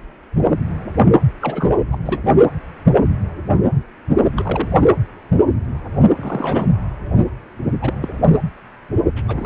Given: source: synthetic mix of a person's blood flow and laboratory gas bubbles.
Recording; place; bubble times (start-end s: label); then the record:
Doppler ultrasound of blood flow; precordium
1.41-1.70 s: bubbles
1.92-1.97 s: bubbles
2.03-2.38 s: bubbles
4.37-4.90 s: bubbles
6.16-6.67 s: bubbles
7.82-7.94 s: bubbles
8.02-8.12 s: bubbles
9.16-9.22 s: bubbles
9.28-9.46 s: bubbles
From the record:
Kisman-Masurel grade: 221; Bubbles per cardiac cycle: several, 3 to 8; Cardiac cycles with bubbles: 10 to 50%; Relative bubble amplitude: barely perceptible (0.100 to 0.250); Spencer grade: 2 (many but less than half of the cardiac periods contain bubble signals, singularly or in groups); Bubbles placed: anywhere in the cardiac cycle